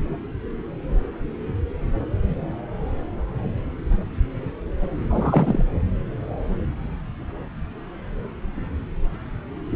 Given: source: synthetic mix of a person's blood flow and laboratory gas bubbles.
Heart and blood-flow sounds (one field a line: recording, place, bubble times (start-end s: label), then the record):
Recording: Doppler ultrasound of blood flow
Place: subclavian vein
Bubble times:
5.09-5.64 s: bubbles
From the record:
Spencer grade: 2 (many but less than half of the cardiac periods contain bubble signals, singularly or in groups)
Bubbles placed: anywhere in the cardiac cycle